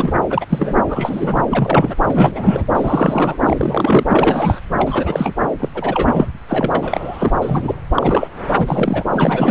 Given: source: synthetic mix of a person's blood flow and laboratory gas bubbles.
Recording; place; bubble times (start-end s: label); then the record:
Doppler ultrasound of blood flow; subclavian vein
0.00-0.12 s: bubbles
0.30-0.45 s: bubbles
0.50-0.75 s: bubbles
0.89-1.42 s: bubbles
1.49-1.96 s: bubbles
2.06-2.65 s: bubbles
2.75-3.38 s: bubbles
3.42-4.04 s: bubbles
4.11-4.60 s: bubbles
4.76-5.35 s: bubbles
5.59-5.69 s: bubbles
5.74-6.27 s: bubbles
6.48-7.32 s: bubbles
7.41-7.75 s: bubbles
7.95-8.28 s: bubbles
8.58-9.04 s: bubbles
9.12-9.51 s: bubbles
From the record:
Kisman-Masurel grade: 333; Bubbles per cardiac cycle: rolling drumbeat, 9 or more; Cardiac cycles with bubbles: 50 to 99%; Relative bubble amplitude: loud (0.450 to 0.775); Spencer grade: 3 (all of the cardiac periods contain showers or single bubble signals, but not dominating or overriding the cardiac motion signals); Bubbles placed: anywhere in the cardiac cycle